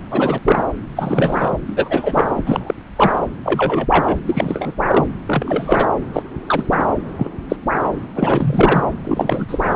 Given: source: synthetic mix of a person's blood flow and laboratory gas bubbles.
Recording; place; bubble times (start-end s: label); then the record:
Doppler ultrasound of blood flow; subclavian vein
0.10-0.40 s: bubbles
0.45-0.62 s: bubbles
0.95-1.51 s: bubbles
1.67-2.42 s: bubbles
2.46-2.74 s: bubbles
2.96-3.23 s: bubbles
3.44-3.87 s: bubbles
3.90-4.18 s: bubbles
4.26-4.75 s: bubbles
4.87-5.08 s: bubbles
5.27-5.90 s: bubbles
6.13-6.23 s: bubbles
6.47-6.67 s: bubbles
6.71-6.86 s: bubbles
7.18-7.30 s: bubbles
7.49-7.56 s: bubbles
7.84-7.92 s: bubbles
8.16-8.84 s: bubbles
9.04-9.75 s: bubbles
From the record:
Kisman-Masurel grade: 243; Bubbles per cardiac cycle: several, 3 to 8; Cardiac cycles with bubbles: 100%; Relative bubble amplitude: loud (0.450 to 0.775); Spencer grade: 3 (all of the cardiac periods contain showers or single bubble signals, but not dominating or overriding the cardiac motion signals); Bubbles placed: anywhere in the cardiac cycle